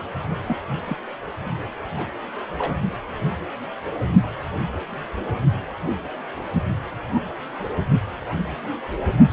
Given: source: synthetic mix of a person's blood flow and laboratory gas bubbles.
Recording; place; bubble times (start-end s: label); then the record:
Doppler ultrasound of blood flow; precordium
0.47-0.56 s: bubbles
0.85-0.97 s: bubbles
1.96-2.13 s: bubbles
2.58-2.73 s: bubbles
7.11-7.22 s: bubbles
From the record:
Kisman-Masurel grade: 121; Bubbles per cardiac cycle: 1 to 2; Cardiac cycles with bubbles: 10 to 50%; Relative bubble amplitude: barely perceptible (0.100 to 0.250); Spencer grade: 2 (many but less than half of the cardiac periods contain bubble signals, singularly or in groups); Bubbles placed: only in the low amplitude regions of the cardiac cycle